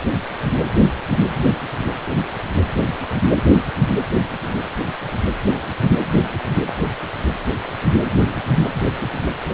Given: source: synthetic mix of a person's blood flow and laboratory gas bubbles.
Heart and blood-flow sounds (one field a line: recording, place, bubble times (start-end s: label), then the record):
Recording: Doppler ultrasound of blood flow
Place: precordium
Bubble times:
no bubbles
From the record:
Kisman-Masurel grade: 000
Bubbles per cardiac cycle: 0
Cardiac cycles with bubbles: 0%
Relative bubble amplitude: no bubbles discernible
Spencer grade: 0 (complete lack of bubble signals)